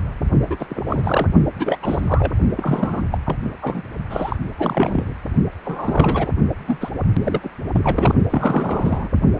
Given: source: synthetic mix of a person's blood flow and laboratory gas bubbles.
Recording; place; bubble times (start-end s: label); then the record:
Doppler ultrasound of blood flow; precordium
0.46-0.56 s: bubbles
0.59-0.67 s: bubbles
0.69-0.82 s: bubbles
0.88-1.28 s: bubbles
1.59-1.77 s: bubbles
1.82-2.33 s: bubbles
2.57-3.02 s: bubbles
3.12-3.18 s: bubbles
3.26-3.38 s: bubbles
3.62-3.83 s: bubbles
4.10-4.36 s: bubbles
4.58-5.15 s: bubbles
5.65-6.30 s: bubbles
6.67-6.77 s: bubbles
6.81-6.90 s: bubbles
7.25-7.49 s: bubbles
7.75-8.13 s: bubbles
8.31-9.08 s: bubbles
From the record:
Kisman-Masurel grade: 332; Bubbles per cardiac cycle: rolling drumbeat, 9 or more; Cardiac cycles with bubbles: 50 to 99%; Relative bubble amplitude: moderate (0.250 to 0.450); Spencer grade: 3 (all of the cardiac periods contain showers or single bubble signals, but not dominating or overriding the cardiac motion signals); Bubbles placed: only in the low amplitude regions of the cardiac cycle